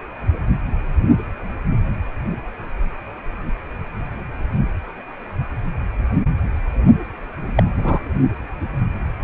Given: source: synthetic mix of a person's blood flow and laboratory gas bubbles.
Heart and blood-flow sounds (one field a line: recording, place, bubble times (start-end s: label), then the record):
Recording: Doppler ultrasound of blood flow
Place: precordium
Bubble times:
7.55-7.63 s: bubbles
7.77-8.00 s: bubbles
From the record:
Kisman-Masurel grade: 113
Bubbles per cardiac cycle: 1 to 2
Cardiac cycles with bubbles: 1 to 10%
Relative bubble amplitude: loud (0.450 to 0.775)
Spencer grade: 1 (occasional bubble signal discernible with the cardiac motion signal, with majority of cardiac periods free of bubbles)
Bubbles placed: anywhere in the cardiac cycle